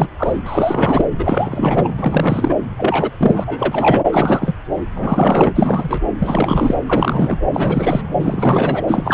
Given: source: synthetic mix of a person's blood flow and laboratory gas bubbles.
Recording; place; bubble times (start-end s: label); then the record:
Doppler ultrasound of blood flow; subclavian vein
0.00-0.08 s: bubbles
0.18-0.39 s: bubbles
0.45-1.04 s: bubbles
1.19-1.90 s: bubbles
1.97-2.54 s: bubbles
2.77-3.10 s: bubbles
3.18-3.44 s: bubbles
3.46-4.05 s: bubbles
4.10-4.54 s: bubbles
4.96-5.51 s: bubbles
5.55-6.00 s: bubbles
6.19-6.75 s: bubbles
6.86-7.37 s: bubbles
7.53-8.03 s: bubbles
8.20-8.83 s: bubbles
8.87-9.14 s: bubbles
From the record:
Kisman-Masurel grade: 343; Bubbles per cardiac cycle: rolling drumbeat, 9 or more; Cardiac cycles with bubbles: 100%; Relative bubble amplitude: loud (0.450 to 0.775); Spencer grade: 3 (all of the cardiac periods contain showers or single bubble signals, but not dominating or overriding the cardiac motion signals); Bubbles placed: anywhere in the cardiac cycle